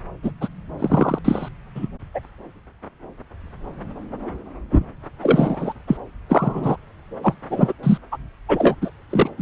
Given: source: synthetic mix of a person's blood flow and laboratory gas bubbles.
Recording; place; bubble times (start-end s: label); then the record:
Doppler ultrasound of blood flow; subclavian vein
0.23-0.32 s: bubbles
0.40-0.49 s: bubbles
0.79-1.19 s: bubbles
1.25-1.49 s: bubbles
1.75-1.89 s: bubbles
2.14-2.21 s: bubbles
4.71-4.86 s: bubbles
5.22-5.74 s: bubbles
5.87-5.97 s: bubbles
6.29-6.76 s: bubbles
7.22-7.33 s: bubbles
7.50-7.72 s: bubbles
7.83-7.98 s: bubbles
8.12-8.18 s: bubbles
8.48-8.76 s: bubbles
8.81-8.91 s: bubbles
9.10-9.29 s: bubbles
9.37-9.42 s: bubbles
From the record:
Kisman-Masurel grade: 233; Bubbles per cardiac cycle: several, 3 to 8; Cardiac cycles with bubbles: 50 to 99%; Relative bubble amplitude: loud (0.450 to 0.775); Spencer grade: 3 (all of the cardiac periods contain showers or single bubble signals, but not dominating or overriding the cardiac motion signals); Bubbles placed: anywhere in the cardiac cycle